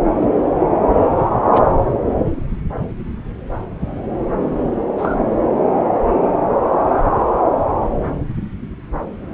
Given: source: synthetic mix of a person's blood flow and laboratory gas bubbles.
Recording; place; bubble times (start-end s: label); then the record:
Doppler ultrasound of blood flow; subclavian vein
1.53-1.62 s: bubbles
4.97-5.16 s: bubbles
From the record:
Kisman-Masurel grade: 112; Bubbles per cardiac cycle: 1 to 2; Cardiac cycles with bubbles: 1 to 10%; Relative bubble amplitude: moderate (0.250 to 0.450); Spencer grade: 1 (occasional bubble signal discernible with the cardiac motion signal, with majority of cardiac periods free of bubbles); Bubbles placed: anywhere in the cardiac cycle